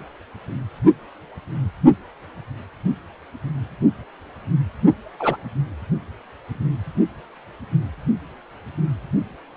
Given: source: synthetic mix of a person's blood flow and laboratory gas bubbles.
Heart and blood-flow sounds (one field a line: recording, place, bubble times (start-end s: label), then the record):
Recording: Doppler ultrasound of blood flow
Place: precordium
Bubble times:
5.19-5.37 s: bubbles
From the record:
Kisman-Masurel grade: 113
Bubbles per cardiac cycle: 1 to 2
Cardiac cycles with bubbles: 1 to 10%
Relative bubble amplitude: loud (0.450 to 0.775)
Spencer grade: 1 (occasional bubble signal discernible with the cardiac motion signal, with majority of cardiac periods free of bubbles)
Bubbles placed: only in the low amplitude regions of the cardiac cycle